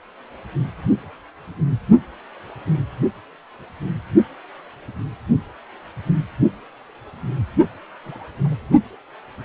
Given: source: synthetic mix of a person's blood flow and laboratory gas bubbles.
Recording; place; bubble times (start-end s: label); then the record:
Doppler ultrasound of blood flow; precordium
8.04-8.26 s: bubbles
8.43-8.54 s: bubbles
From the record:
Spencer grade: 1 (occasional bubble signal discernible with the cardiac motion signal, with majority of cardiac periods free of bubbles); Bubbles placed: only in the low amplitude regions of the cardiac cycle